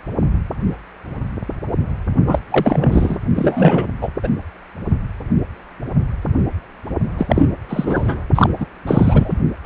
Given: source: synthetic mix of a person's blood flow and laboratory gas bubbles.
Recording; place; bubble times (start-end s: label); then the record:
Doppler ultrasound of blood flow; precordium
2.27-2.39 s: bubbles
2.50-3.19 s: bubbles
3.35-3.87 s: bubbles
4.01-4.09 s: bubbles
4.23-4.28 s: bubbles
7.18-7.50 s: bubbles
7.69-8.22 s: bubbles
8.35-8.49 s: bubbles
8.59-8.66 s: bubbles
8.87-9.39 s: bubbles
9.63-9.66 s: bubbles
From the record:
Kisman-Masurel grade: 333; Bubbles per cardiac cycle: rolling drumbeat, 9 or more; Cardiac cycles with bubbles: 50 to 99%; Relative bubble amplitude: loud (0.450 to 0.775); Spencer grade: 3 (all of the cardiac periods contain showers or single bubble signals, but not dominating or overriding the cardiac motion signals); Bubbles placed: only in the low amplitude regions of the cardiac cycle